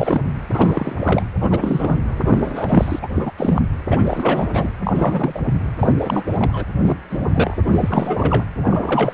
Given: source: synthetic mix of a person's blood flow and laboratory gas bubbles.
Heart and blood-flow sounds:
Doppler ultrasound of blood flow; precordium
0.00-0.21 s: bubbles
0.52-0.96 s: bubbles
0.99-1.24 s: bubbles
1.41-1.96 s: bubbles
2.24-2.40 s: bubbles
2.42-2.99 s: bubbles
3.02-3.31 s: bubbles
3.38-3.62 s: bubbles
3.90-4.49 s: bubbles
4.53-4.69 s: bubbles
4.84-5.41 s: bubbles
5.46-5.54 s: bubbles
5.79-5.91 s: bubbles
5.98-6.23 s: bubbles
6.30-6.64 s: bubbles
6.79-6.98 s: bubbles
7.10-7.54 s: bubbles
7.65-8.45 s: bubbles
8.65-9.14 s: bubbles
From the record:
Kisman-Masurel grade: 342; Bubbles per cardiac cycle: rolling drumbeat, 9 or more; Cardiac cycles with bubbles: 100%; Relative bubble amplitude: moderate (0.250 to 0.450); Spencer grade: 3 (all of the cardiac periods contain showers or single bubble signals, but not dominating or overriding the cardiac motion signals); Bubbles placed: anywhere in the cardiac cycle

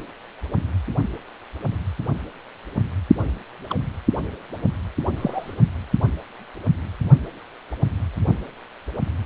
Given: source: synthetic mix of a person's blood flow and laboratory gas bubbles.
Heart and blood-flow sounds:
Doppler ultrasound of blood flow; precordium
3.69-3.76 s: bubbles
5.17-5.54 s: bubbles
From the record:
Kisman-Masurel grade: 121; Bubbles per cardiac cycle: 1 to 2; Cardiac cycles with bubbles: 10 to 50%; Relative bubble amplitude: barely perceptible (0.100 to 0.250); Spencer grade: 2 (many but less than half of the cardiac periods contain bubble signals, singularly or in groups); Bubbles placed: only in the low amplitude regions of the cardiac cycle

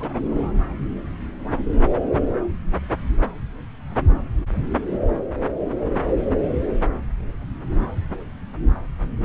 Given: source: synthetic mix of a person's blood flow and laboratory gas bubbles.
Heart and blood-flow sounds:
Doppler ultrasound of blood flow; subclavian vein
0.00-0.10 s: bubbles
0.30-0.59 s: bubbles
From the record:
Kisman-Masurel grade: 211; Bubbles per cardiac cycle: several, 3 to 8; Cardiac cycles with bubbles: 1 to 10%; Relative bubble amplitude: barely perceptible (0.100 to 0.250); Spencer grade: 1 (occasional bubble signal discernible with the cardiac motion signal, with majority of cardiac periods free of bubbles); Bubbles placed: anywhere in the cardiac cycle

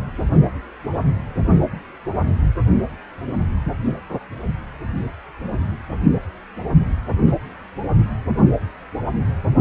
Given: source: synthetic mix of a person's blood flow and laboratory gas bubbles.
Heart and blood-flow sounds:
Doppler ultrasound of blood flow; precordium
7.27-7.33 s: bubbles
From the record:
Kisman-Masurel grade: 113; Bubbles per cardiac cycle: 1 to 2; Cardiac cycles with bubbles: 1 to 10%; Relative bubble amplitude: loud (0.450 to 0.775); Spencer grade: 1 (occasional bubble signal discernible with the cardiac motion signal, with majority of cardiac periods free of bubbles); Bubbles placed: anywhere in the cardiac cycle

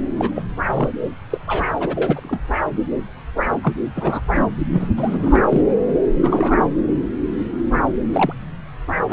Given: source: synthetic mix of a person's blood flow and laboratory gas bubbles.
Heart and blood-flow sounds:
Doppler ultrasound of blood flow; subclavian vein
0.17-0.30 s: bubbles
0.35-0.42 s: bubbles
0.66-0.89 s: bubbles
1.30-1.38 s: bubbles
1.47-1.67 s: bubbles
1.79-2.40 s: bubbles
3.62-3.73 s: bubbles
3.95-4.21 s: bubbles
4.34-4.45 s: bubbles
4.72-4.88 s: bubbles
4.96-5.61 s: bubbles
6.22-6.56 s: bubbles
8.13-8.33 s: bubbles
9.10-9.13 s: bubbles
From the record:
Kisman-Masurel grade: 232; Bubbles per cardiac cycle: several, 3 to 8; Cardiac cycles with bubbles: 50 to 99%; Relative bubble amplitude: moderate (0.250 to 0.450); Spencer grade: 3 (all of the cardiac periods contain showers or single bubble signals, but not dominating or overriding the cardiac motion signals); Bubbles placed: anywhere in the cardiac cycle

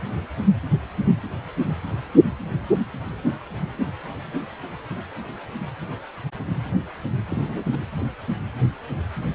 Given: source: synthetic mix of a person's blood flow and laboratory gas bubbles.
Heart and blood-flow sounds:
Doppler ultrasound of blood flow; precordium
7.29-7.79 s: bubbles
From the record:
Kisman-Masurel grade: 211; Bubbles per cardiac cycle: several, 3 to 8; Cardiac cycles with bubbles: 1 to 10%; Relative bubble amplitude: barely perceptible (0.100 to 0.250); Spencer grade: 1 (occasional bubble signal discernible with the cardiac motion signal, with majority of cardiac periods free of bubbles); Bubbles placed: anywhere in the cardiac cycle

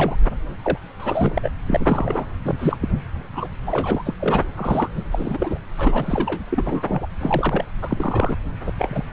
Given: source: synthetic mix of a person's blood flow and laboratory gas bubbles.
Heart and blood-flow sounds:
Doppler ultrasound of blood flow; subclavian vein
0.00-0.16 s: bubbles
0.64-0.78 s: bubbles
1.00-1.50 s: bubbles
1.66-2.26 s: bubbles
2.45-2.55 s: bubbles
2.59-2.77 s: bubbles
2.81-2.88 s: bubbles
3.33-3.48 s: bubbles
3.66-4.02 s: bubbles
4.05-4.14 s: bubbles
4.18-4.44 s: bubbles
4.56-4.88 s: bubbles
4.95-5.02 s: bubbles
5.12-5.58 s: bubbles
5.77-6.42 s: bubbles
6.50-7.08 s: bubbles
7.20-7.64 s: bubbles
7.81-8.36 s: bubbles
8.66-8.72 s: bubbles
8.78-9.04 s: bubbles
From the record:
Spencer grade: 3 (all of the cardiac periods contain showers or single bubble signals, but not dominating or overriding the cardiac motion signals); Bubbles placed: anywhere in the cardiac cycle

